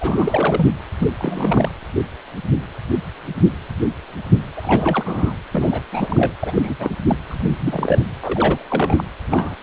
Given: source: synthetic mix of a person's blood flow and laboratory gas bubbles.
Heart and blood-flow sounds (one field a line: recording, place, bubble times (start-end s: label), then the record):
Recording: Doppler ultrasound of blood flow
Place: precordium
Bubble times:
0.00-0.67 s: bubbles
0.98-1.10 s: bubbles
1.19-1.69 s: bubbles
4.57-5.35 s: bubbles
5.51-5.83 s: bubbles
5.92-6.33 s: bubbles
6.39-6.91 s: bubbles
7.06-7.17 s: bubbles
7.28-7.57 s: bubbles
7.59-8.04 s: bubbles
8.20-8.66 s: bubbles
8.69-9.04 s: bubbles
9.28-9.55 s: bubbles
From the record:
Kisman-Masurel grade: 332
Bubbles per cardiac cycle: rolling drumbeat, 9 or more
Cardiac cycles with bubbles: 50 to 99%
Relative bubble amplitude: moderate (0.250 to 0.450)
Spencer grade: 3 (all of the cardiac periods contain showers or single bubble signals, but not dominating or overriding the cardiac motion signals)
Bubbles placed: anywhere in the cardiac cycle